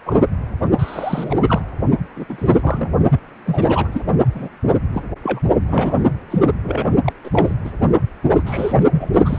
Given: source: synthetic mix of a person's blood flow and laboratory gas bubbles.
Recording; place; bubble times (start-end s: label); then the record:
Doppler ultrasound of blood flow; precordium
0.05-0.20 s: bubbles
0.78-1.62 s: bubbles
2.16-2.25 s: bubbles
2.29-3.01 s: bubbles
3.11-3.18 s: bubbles
3.46-3.89 s: bubbles
3.92-4.02 s: bubbles
4.34-4.49 s: bubbles
4.92-5.01 s: bubbles
5.23-5.41 s: bubbles
5.67-5.95 s: bubbles
6.30-6.38 s: bubbles
6.42-6.48 s: bubbles
6.63-6.91 s: bubbles
7.04-7.12 s: bubbles
7.24-7.54 s: bubbles
7.65-7.71 s: bubbles
8.30-8.43 s: bubbles
8.46-8.84 s: bubbles
8.91-9.38 s: bubbles
From the record:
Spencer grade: 3 (all of the cardiac periods contain showers or single bubble signals, but not dominating or overriding the cardiac motion signals); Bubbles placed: only in the low amplitude regions of the cardiac cycle